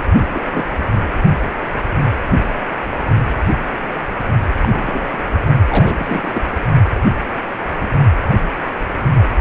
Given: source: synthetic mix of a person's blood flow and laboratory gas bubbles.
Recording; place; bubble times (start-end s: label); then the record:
Doppler ultrasound of blood flow; precordium
0.20-0.78 s: bubbles
4.62-5.17 s: bubbles
5.69-6.42 s: bubbles
From the record:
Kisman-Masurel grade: 221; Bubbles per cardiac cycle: several, 3 to 8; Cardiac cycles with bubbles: 10 to 50%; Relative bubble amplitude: barely perceptible (0.100 to 0.250); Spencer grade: 2 (many but less than half of the cardiac periods contain bubble signals, singularly or in groups); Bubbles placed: only in the low amplitude regions of the cardiac cycle